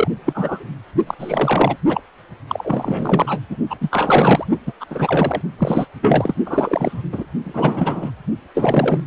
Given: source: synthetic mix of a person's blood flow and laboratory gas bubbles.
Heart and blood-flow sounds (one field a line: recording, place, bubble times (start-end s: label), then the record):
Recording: Doppler ultrasound of blood flow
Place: precordium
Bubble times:
0.00-0.08 s: bubbles
0.26-0.64 s: bubbles
1.06-1.15 s: bubbles
1.19-1.77 s: bubbles
1.89-2.01 s: bubbles
2.48-3.39 s: bubbles
3.50-3.57 s: bubbles
3.69-3.76 s: bubbles
3.81-4.45 s: bubbles
4.66-4.72 s: bubbles
4.80-4.86 s: bubbles
4.90-5.42 s: bubbles
5.58-5.86 s: bubbles
6.02-6.34 s: bubbles
6.46-7.02 s: bubbles
7.12-7.25 s: bubbles
7.42-8.11 s: bubbles
8.54-9.00 s: bubbles
From the record:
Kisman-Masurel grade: 343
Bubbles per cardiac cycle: rolling drumbeat, 9 or more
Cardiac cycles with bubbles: 100%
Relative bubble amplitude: loud (0.450 to 0.775)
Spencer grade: 3 (all of the cardiac periods contain showers or single bubble signals, but not dominating or overriding the cardiac motion signals)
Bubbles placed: only in the low amplitude regions of the cardiac cycle